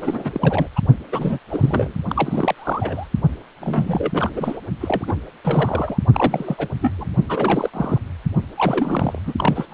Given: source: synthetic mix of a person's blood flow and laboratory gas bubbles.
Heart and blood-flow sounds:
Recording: Doppler ultrasound of blood flow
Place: precordium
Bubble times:
0.01-0.67 s: bubbles
0.76-0.80 s: bubbles
1.11-1.39 s: bubbles
1.50-1.94 s: bubbles
2.09-3.08 s: bubbles
3.60-4.59 s: bubbles
4.81-5.14 s: bubbles
5.44-5.98 s: bubbles
6.14-6.68 s: bubbles
6.81-6.95 s: bubbles
6.99-7.07 s: bubbles
7.29-7.70 s: bubbles
7.74-7.98 s: bubbles
8.56-9.19 s: bubbles
9.26-9.34 s: bubbles
9.38-9.66 s: bubbles
9.71-9.74 s: bubbles
From the record:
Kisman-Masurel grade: 342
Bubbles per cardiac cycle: rolling drumbeat, 9 or more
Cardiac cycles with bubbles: 100%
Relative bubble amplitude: moderate (0.250 to 0.450)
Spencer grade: 3 (all of the cardiac periods contain showers or single bubble signals, but not dominating or overriding the cardiac motion signals)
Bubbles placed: only in the low amplitude regions of the cardiac cycle

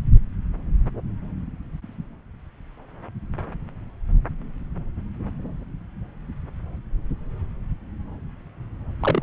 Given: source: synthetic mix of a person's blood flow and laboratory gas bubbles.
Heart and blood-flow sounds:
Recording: Doppler ultrasound of blood flow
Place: subclavian vein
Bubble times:
9.00-9.23 s: bubbles
From the record:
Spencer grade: 1 (occasional bubble signal discernible with the cardiac motion signal, with majority of cardiac periods free of bubbles)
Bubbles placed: anywhere in the cardiac cycle

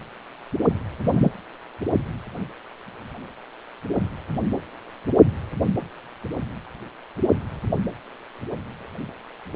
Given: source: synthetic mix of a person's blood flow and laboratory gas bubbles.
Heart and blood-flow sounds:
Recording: Doppler ultrasound of blood flow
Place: precordium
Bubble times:
1.03-1.31 s: bubbles
From the record:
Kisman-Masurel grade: 112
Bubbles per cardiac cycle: 1 to 2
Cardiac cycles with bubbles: 1 to 10%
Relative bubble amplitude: moderate (0.250 to 0.450)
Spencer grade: 1 (occasional bubble signal discernible with the cardiac motion signal, with majority of cardiac periods free of bubbles)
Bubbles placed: anywhere in the cardiac cycle

